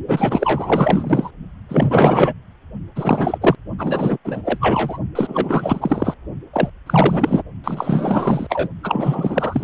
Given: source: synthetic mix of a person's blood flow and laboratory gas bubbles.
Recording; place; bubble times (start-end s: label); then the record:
Doppler ultrasound of blood flow; precordium
0.08-1.31 s: bubbles
1.69-2.33 s: bubbles
2.95-3.38 s: bubbles
3.41-3.56 s: bubbles
3.78-4.18 s: bubbles
4.24-4.42 s: bubbles
4.45-4.99 s: bubbles
5.15-6.15 s: bubbles
6.53-6.70 s: bubbles
6.86-7.43 s: bubbles
7.64-8.68 s: bubbles
8.83-9.64 s: bubbles
From the record:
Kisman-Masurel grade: 444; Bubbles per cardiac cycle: continuous sound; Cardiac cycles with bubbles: 100%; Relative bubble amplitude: maximal (0.775 to 0.999); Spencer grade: 4 (maximum detectable bubble signal sounding continuously throughout systole and diastole of every cardiac period, and overriding the amplitude of the normal cardiac signals); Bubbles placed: only in the low amplitude regions of the cardiac cycle